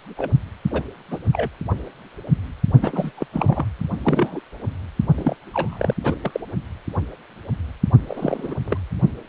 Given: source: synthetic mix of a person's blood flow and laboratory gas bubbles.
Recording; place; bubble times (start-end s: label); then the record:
Doppler ultrasound of blood flow; precordium
0.17-0.31 s: bubbles
0.71-0.82 s: bubbles
1.10-1.19 s: bubbles
1.32-1.49 s: bubbles
2.81-3.11 s: bubbles
3.17-3.26 s: bubbles
3.33-3.65 s: bubbles
4.03-4.41 s: bubbles
5.16-5.35 s: bubbles
5.54-5.95 s: bubbles
6.04-6.16 s: bubbles
6.22-6.40 s: bubbles
8.07-8.55 s: bubbles
8.65-8.78 s: bubbles
From the record:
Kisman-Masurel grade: 232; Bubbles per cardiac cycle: several, 3 to 8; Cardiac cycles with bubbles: 50 to 99%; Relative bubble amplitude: moderate (0.250 to 0.450); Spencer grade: 3 (all of the cardiac periods contain showers or single bubble signals, but not dominating or overriding the cardiac motion signals); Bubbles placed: only in the low amplitude regions of the cardiac cycle